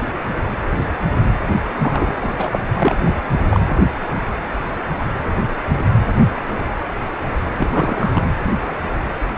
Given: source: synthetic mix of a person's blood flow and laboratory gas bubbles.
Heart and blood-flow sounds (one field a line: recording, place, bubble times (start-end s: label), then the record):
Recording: Doppler ultrasound of blood flow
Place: precordium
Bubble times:
1.80-2.33 s: bubbles
2.38-2.59 s: bubbles
2.74-2.97 s: bubbles
3.03-3.17 s: bubbles
3.50-3.60 s: bubbles
7.58-8.22 s: bubbles
From the record:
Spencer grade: 2 (many but less than half of the cardiac periods contain bubble signals, singularly or in groups)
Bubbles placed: anywhere in the cardiac cycle